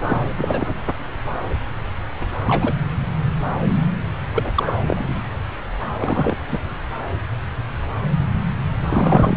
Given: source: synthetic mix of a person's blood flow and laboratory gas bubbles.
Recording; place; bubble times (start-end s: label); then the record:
Doppler ultrasound of blood flow; subclavian vein
0.02-0.21 s: bubbles
0.37-0.74 s: bubbles
2.45-2.73 s: bubbles
4.33-4.51 s: bubbles
4.55-4.73 s: bubbles
4.86-5.21 s: bubbles
5.98-6.36 s: bubbles
6.48-6.58 s: bubbles
8.89-9.37 s: bubbles
From the record:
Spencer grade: 2 (many but less than half of the cardiac periods contain bubble signals, singularly or in groups); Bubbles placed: anywhere in the cardiac cycle